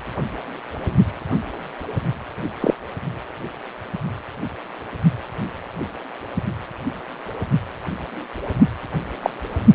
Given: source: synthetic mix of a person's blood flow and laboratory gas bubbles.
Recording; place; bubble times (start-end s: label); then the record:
Doppler ultrasound of blood flow; precordium
2.60-2.74 s: bubbles
9.22-9.30 s: bubbles
From the record:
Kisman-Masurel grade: 123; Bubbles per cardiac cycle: 1 to 2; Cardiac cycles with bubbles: 10 to 50%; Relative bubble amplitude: loud (0.450 to 0.775); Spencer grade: 2 (many but less than half of the cardiac periods contain bubble signals, singularly or in groups); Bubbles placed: only in the low amplitude regions of the cardiac cycle